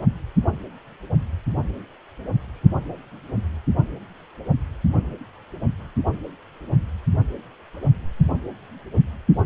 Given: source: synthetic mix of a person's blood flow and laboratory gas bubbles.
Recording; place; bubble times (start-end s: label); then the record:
Doppler ultrasound of blood flow; precordium
no bubbles
From the record:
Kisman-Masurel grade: 000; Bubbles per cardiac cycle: 0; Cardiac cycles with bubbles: 0%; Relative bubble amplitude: no bubbles discernible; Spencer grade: 0 (complete lack of bubble signals)